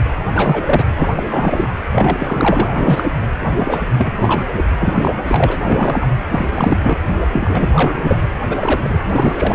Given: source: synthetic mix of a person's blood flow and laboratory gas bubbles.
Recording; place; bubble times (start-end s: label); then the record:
Doppler ultrasound of blood flow; precordium
0.34-0.84 s: bubbles
0.96-1.09 s: bubbles
1.15-1.23 s: bubbles
1.26-1.68 s: bubbles
1.92-2.72 s: bubbles
2.75-3.10 s: bubbles
3.56-3.87 s: bubbles
3.97-4.45 s: bubbles
4.56-4.64 s: bubbles
4.79-5.14 s: bubbles
5.27-5.56 s: bubbles
5.61-6.10 s: bubbles
6.31-6.52 s: bubbles
6.55-6.98 s: bubbles
7.32-7.72 s: bubbles
7.75-8.18 s: bubbles
8.49-8.57 s: bubbles
8.62-8.97 s: bubbles
9.04-9.55 s: bubbles
From the record:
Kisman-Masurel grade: 343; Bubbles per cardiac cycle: rolling drumbeat, 9 or more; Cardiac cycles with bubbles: 100%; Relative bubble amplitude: loud (0.450 to 0.775); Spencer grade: 3 (all of the cardiac periods contain showers or single bubble signals, but not dominating or overriding the cardiac motion signals); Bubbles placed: anywhere in the cardiac cycle